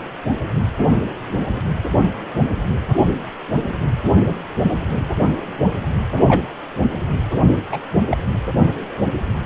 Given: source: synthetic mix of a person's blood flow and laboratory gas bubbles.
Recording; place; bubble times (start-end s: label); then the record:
Doppler ultrasound of blood flow; precordium
6.16-6.22 s: bubbles
6.27-6.43 s: bubbles
7.72-7.78 s: bubbles
8.08-8.17 s: bubbles
From the record:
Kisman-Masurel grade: 123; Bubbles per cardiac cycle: 1 to 2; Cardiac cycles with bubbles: 10 to 50%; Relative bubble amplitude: loud (0.450 to 0.775); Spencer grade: 2 (many but less than half of the cardiac periods contain bubble signals, singularly or in groups); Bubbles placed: anywhere in the cardiac cycle